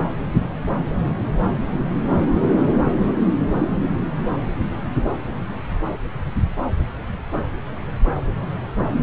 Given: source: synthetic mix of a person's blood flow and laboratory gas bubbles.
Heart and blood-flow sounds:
Doppler ultrasound of blood flow; subclavian vein
no bubbles
From the record:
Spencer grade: 0 (complete lack of bubble signals)

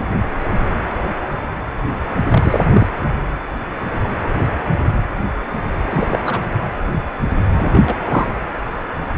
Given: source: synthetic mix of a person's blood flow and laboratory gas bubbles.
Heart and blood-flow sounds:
Doppler ultrasound of blood flow; precordium
2.29-2.87 s: bubbles
5.90-6.07 s: bubbles
6.10-6.19 s: bubbles
6.25-6.39 s: bubbles
7.56-7.97 s: bubbles
8.04-8.32 s: bubbles
From the record:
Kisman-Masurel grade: 223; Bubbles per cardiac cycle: several, 3 to 8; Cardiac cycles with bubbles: 10 to 50%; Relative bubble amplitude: loud (0.450 to 0.775); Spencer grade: 2 (many but less than half of the cardiac periods contain bubble signals, singularly or in groups); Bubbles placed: anywhere in the cardiac cycle

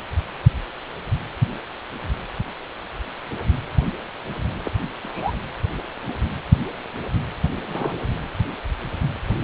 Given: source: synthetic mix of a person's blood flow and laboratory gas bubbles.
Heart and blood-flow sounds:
Doppler ultrasound of blood flow; precordium
4.64-4.71 s: bubbles
5.02-5.33 s: bubbles
6.08-6.14 s: bubbles
7.56-8.24 s: bubbles
From the record:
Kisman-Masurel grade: 121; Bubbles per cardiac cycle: 1 to 2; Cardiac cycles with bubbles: 10 to 50%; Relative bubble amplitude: barely perceptible (0.100 to 0.250); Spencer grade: 2 (many but less than half of the cardiac periods contain bubble signals, singularly or in groups); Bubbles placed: anywhere in the cardiac cycle

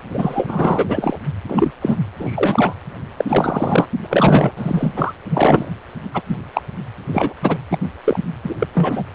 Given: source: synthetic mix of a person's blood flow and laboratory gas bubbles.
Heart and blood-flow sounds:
Doppler ultrasound of blood flow; precordium
0.09-0.85 s: bubbles
0.88-1.17 s: bubbles
1.48-1.71 s: bubbles
1.81-1.97 s: bubbles
2.19-2.75 s: bubbles
3.17-3.25 s: bubbles
3.27-3.86 s: bubbles
4.04-4.07 s: bubbles
4.10-4.52 s: bubbles
4.56-4.93 s: bubbles
4.96-5.14 s: bubbles
5.30-5.70 s: bubbles
6.14-6.22 s: bubbles
6.29-6.37 s: bubbles
6.53-6.62 s: bubbles
7.12-7.34 s: bubbles
7.42-7.58 s: bubbles
7.71-7.79 s: bubbles
8.04-8.20 s: bubbles
8.43-8.55 s: bubbles
8.58-8.67 s: bubbles
8.74-9.04 s: bubbles
From the record:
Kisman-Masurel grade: 233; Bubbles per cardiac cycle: several, 3 to 8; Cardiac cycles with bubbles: 50 to 99%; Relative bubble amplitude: loud (0.450 to 0.775); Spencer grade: 3 (all of the cardiac periods contain showers or single bubble signals, but not dominating or overriding the cardiac motion signals); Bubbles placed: anywhere in the cardiac cycle

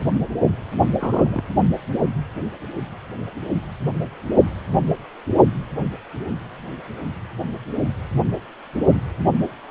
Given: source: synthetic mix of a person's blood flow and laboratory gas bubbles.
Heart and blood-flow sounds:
Doppler ultrasound of blood flow; precordium
0.98-1.42 s: bubbles
From the record:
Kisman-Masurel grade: 111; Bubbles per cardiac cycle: 1 to 2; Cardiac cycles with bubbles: 1 to 10%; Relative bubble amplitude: barely perceptible (0.100 to 0.250); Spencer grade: 1 (occasional bubble signal discernible with the cardiac motion signal, with majority of cardiac periods free of bubbles); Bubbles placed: only in the low amplitude regions of the cardiac cycle

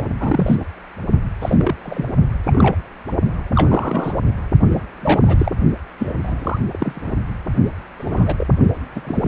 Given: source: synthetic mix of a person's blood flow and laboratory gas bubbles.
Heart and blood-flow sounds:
Doppler ultrasound of blood flow; precordium
0.00-0.08 s: bubbles
0.20-0.55 s: bubbles
0.60-0.65 s: bubbles
1.41-1.76 s: bubbles
1.82-2.07 s: bubbles
2.46-2.75 s: bubbles
3.55-4.17 s: bubbles
4.70-4.81 s: bubbles
5.01-5.22 s: bubbles
5.26-5.51 s: bubbles
5.99-6.14 s: bubbles
6.23-6.59 s: bubbles
6.71-7.18 s: bubbles
7.98-8.47 s: bubbles
8.96-9.02 s: bubbles
9.04-9.28 s: bubbles
From the record:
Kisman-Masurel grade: 242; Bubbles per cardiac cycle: several, 3 to 8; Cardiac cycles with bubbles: 100%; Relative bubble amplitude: moderate (0.250 to 0.450); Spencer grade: 3 (all of the cardiac periods contain showers or single bubble signals, but not dominating or overriding the cardiac motion signals); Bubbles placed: only in the low amplitude regions of the cardiac cycle

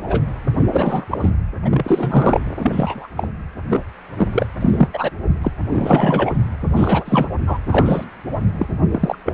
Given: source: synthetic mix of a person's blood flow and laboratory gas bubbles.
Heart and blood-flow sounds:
Doppler ultrasound of blood flow; precordium
0.00-0.22 s: bubbles
0.67-1.05 s: bubbles
1.10-1.30 s: bubbles
1.64-2.41 s: bubbles
2.58-3.07 s: bubbles
3.17-3.27 s: bubbles
3.70-3.82 s: bubbles
4.17-4.27 s: bubbles
4.32-4.46 s: bubbles
4.60-4.88 s: bubbles
4.93-5.10 s: bubbles
5.41-5.51 s: bubbles
5.72-6.31 s: bubbles
6.76-7.28 s: bubbles
7.46-7.58 s: bubbles
7.68-8.05 s: bubbles
8.58-8.67 s: bubbles
8.91-9.15 s: bubbles
9.25-9.33 s: bubbles
From the record:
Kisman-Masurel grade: 243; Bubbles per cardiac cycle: several, 3 to 8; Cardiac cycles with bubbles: 100%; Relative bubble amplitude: loud (0.450 to 0.775); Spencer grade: 3 (all of the cardiac periods contain showers or single bubble signals, but not dominating or overriding the cardiac motion signals); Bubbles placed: anywhere in the cardiac cycle

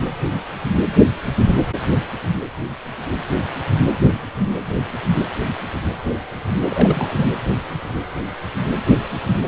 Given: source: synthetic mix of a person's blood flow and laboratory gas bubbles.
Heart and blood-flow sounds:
Doppler ultrasound of blood flow; precordium
6.68-7.27 s: bubbles
From the record:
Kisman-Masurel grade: 112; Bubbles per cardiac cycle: 1 to 2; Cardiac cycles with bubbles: 1 to 10%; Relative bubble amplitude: moderate (0.250 to 0.450); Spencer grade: 1 (occasional bubble signal discernible with the cardiac motion signal, with majority of cardiac periods free of bubbles); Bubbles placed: anywhere in the cardiac cycle

